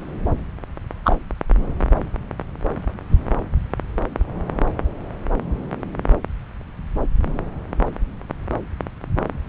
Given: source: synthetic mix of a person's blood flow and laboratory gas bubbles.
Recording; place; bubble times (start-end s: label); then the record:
Doppler ultrasound of blood flow; subclavian vein
1.04-1.16 s: bubbles
From the record:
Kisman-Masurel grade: 113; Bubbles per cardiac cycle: 1 to 2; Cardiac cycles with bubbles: 1 to 10%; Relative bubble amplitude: loud (0.450 to 0.775); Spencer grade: 1 (occasional bubble signal discernible with the cardiac motion signal, with majority of cardiac periods free of bubbles); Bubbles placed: anywhere in the cardiac cycle